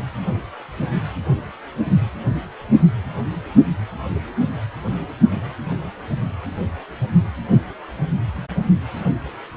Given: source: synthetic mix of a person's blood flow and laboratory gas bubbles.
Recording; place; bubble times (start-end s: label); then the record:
Doppler ultrasound of blood flow; precordium
no bubbles
From the record:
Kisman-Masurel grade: 000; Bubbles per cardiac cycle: 0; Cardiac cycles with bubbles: 0%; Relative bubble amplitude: no bubbles discernible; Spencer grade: 0 (complete lack of bubble signals)